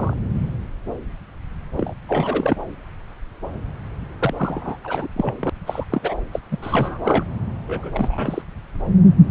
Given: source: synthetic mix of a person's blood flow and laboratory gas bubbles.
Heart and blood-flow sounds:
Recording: Doppler ultrasound of blood flow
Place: subclavian vein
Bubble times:
0.00-0.13 s: bubbles
1.77-1.94 s: bubbles
2.08-2.56 s: bubbles
4.19-4.34 s: bubbles
4.38-4.77 s: bubbles
4.84-5.08 s: bubbles
5.16-5.35 s: bubbles
5.40-5.50 s: bubbles
5.67-5.85 s: bubbles
5.90-6.14 s: bubbles
6.32-6.40 s: bubbles
6.51-6.58 s: bubbles
6.62-7.25 s: bubbles
7.68-8.42 s: bubbles
From the record:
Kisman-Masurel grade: 232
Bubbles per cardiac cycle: several, 3 to 8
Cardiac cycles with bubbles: 50 to 99%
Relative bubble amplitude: moderate (0.250 to 0.450)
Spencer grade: 3 (all of the cardiac periods contain showers or single bubble signals, but not dominating or overriding the cardiac motion signals)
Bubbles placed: anywhere in the cardiac cycle

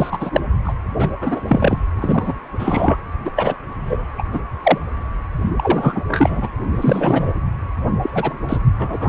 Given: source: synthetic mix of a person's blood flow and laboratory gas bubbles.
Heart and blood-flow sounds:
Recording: Doppler ultrasound of blood flow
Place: precordium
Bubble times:
0.00-0.30 s: bubbles
0.33-0.41 s: bubbles
0.64-0.75 s: bubbles
0.99-1.09 s: bubbles
1.21-1.87 s: bubbles
2.01-2.34 s: bubbles
2.58-2.97 s: bubbles
3.25-3.31 s: bubbles
3.36-3.54 s: bubbles
3.85-4.06 s: bubbles
4.18-4.23 s: bubbles
4.31-4.40 s: bubbles
4.63-4.78 s: bubbles
5.56-6.01 s: bubbles
6.08-6.49 s: bubbles
6.75-7.33 s: bubbles
8.03-8.34 s: bubbles
8.49-8.57 s: bubbles
8.79-9.09 s: bubbles
From the record:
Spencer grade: 3 (all of the cardiac periods contain showers or single bubble signals, but not dominating or overriding the cardiac motion signals)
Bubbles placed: anywhere in the cardiac cycle

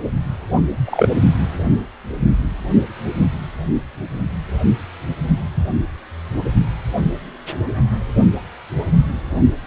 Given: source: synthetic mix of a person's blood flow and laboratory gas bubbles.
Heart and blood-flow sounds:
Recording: Doppler ultrasound of blood flow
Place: precordium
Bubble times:
0.85-1.08 s: bubbles
From the record:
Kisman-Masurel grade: 113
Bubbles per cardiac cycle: 1 to 2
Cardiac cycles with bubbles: 1 to 10%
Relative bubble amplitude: loud (0.450 to 0.775)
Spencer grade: 1 (occasional bubble signal discernible with the cardiac motion signal, with majority of cardiac periods free of bubbles)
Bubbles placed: only in the low amplitude regions of the cardiac cycle

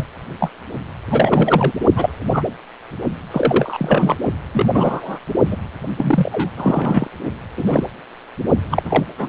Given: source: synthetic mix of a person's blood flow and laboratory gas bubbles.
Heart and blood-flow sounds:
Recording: Doppler ultrasound of blood flow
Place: precordium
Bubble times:
0.00-0.05 s: bubbles
0.40-0.51 s: bubbles
1.10-1.72 s: bubbles
1.96-2.09 s: bubbles
2.33-2.43 s: bubbles
3.31-4.16 s: bubbles
4.53-4.67 s: bubbles
4.72-5.18 s: bubbles
5.47-5.57 s: bubbles
5.97-6.50 s: bubbles
6.57-7.07 s: bubbles
7.57-7.84 s: bubbles
8.71-9.04 s: bubbles
9.18-9.29 s: bubbles
From the record:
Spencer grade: 3 (all of the cardiac periods contain showers or single bubble signals, but not dominating or overriding the cardiac motion signals)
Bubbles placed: only in the low amplitude regions of the cardiac cycle

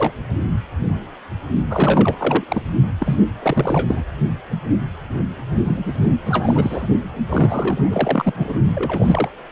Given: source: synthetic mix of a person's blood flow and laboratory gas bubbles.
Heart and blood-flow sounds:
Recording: Doppler ultrasound of blood flow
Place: precordium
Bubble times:
0.00-0.13 s: bubbles
1.70-2.44 s: bubbles
2.48-2.62 s: bubbles
3.00-3.20 s: bubbles
3.42-4.04 s: bubbles
5.64-6.11 s: bubbles
6.24-6.87 s: bubbles
7.30-8.32 s: bubbles
8.37-8.60 s: bubbles
8.75-9.29 s: bubbles
From the record:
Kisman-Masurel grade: 332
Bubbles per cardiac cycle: rolling drumbeat, 9 or more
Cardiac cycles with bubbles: 50 to 99%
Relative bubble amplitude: moderate (0.250 to 0.450)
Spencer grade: 3 (all of the cardiac periods contain showers or single bubble signals, but not dominating or overriding the cardiac motion signals)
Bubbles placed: only in the low amplitude regions of the cardiac cycle

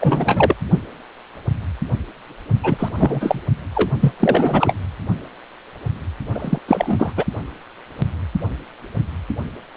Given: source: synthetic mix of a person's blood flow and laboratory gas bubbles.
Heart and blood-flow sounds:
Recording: Doppler ultrasound of blood flow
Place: precordium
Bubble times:
0.01-0.54 s: bubbles
2.63-2.89 s: bubbles
2.96-3.40 s: bubbles
3.75-3.91 s: bubbles
4.00-4.13 s: bubbles
4.20-4.74 s: bubbles
6.34-6.58 s: bubbles
6.67-7.12 s: bubbles
7.17-7.24 s: bubbles
From the record:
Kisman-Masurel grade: 333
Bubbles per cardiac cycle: rolling drumbeat, 9 or more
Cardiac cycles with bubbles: 50 to 99%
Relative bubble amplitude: loud (0.450 to 0.775)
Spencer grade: 3 (all of the cardiac periods contain showers or single bubble signals, but not dominating or overriding the cardiac motion signals)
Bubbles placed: only in the low amplitude regions of the cardiac cycle

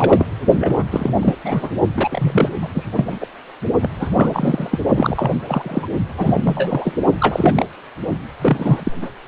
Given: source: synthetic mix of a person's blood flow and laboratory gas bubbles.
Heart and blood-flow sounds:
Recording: Doppler ultrasound of blood flow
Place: precordium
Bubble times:
0.00-0.26 s: bubbles
0.58-0.85 s: bubbles
0.92-1.12 s: bubbles
1.21-1.34 s: bubbles
1.44-1.70 s: bubbles
1.97-2.50 s: bubbles
2.62-2.68 s: bubbles
2.75-3.05 s: bubbles
3.08-3.18 s: bubbles
3.21-3.26 s: bubbles
3.83-3.89 s: bubbles
4.00-4.09 s: bubbles
4.15-4.79 s: bubbles
4.94-5.31 s: bubbles
5.44-5.88 s: bubbles
6.17-6.40 s: bubbles
6.44-6.97 s: bubbles
7.19-7.66 s: bubbles
8.41-8.91 s: bubbles
9.02-9.08 s: bubbles
9.25-9.28 s: bubbles
From the record:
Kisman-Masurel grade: 342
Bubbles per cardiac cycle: rolling drumbeat, 9 or more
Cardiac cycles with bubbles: 100%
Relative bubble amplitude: moderate (0.250 to 0.450)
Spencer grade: 3 (all of the cardiac periods contain showers or single bubble signals, but not dominating or overriding the cardiac motion signals)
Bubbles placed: only in the low amplitude regions of the cardiac cycle

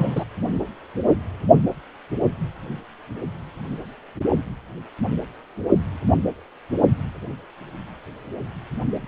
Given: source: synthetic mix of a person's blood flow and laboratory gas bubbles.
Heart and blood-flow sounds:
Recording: Doppler ultrasound of blood flow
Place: precordium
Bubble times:
0.00-0.24 s: bubbles
From the record:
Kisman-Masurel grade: 223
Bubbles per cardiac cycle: several, 3 to 8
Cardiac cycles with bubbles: 10 to 50%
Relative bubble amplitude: loud (0.450 to 0.775)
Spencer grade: 2 (many but less than half of the cardiac periods contain bubble signals, singularly or in groups)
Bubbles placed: only in the low amplitude regions of the cardiac cycle

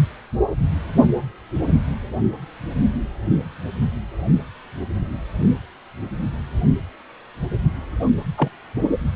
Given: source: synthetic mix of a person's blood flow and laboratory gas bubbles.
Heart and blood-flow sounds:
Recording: Doppler ultrasound of blood flow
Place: precordium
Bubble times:
8.37-8.48 s: bubbles
From the record:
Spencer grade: 1 (occasional bubble signal discernible with the cardiac motion signal, with majority of cardiac periods free of bubbles)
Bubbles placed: anywhere in the cardiac cycle

